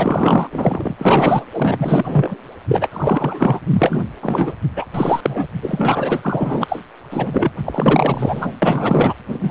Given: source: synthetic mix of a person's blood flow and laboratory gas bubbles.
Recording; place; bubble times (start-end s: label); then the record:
Doppler ultrasound of blood flow; precordium
0.00-0.47 s: bubbles
0.52-0.94 s: bubbles
0.97-1.45 s: bubbles
1.52-2.35 s: bubbles
2.68-2.88 s: bubbles
2.91-3.60 s: bubbles
3.70-4.04 s: bubbles
4.22-4.54 s: bubbles
4.75-4.86 s: bubbles
4.94-5.46 s: bubbles
5.62-6.79 s: bubbles
7.11-7.50 s: bubbles
7.66-8.53 s: bubbles
8.62-9.13 s: bubbles
9.31-9.51 s: bubbles
From the record:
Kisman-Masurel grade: 444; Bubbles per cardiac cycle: continuous sound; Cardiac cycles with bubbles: 100%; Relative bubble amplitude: maximal (0.775 to 0.999); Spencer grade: 4 (maximum detectable bubble signal sounding continuously throughout systole and diastole of every cardiac period, and overriding the amplitude of the normal cardiac signals); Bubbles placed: anywhere in the cardiac cycle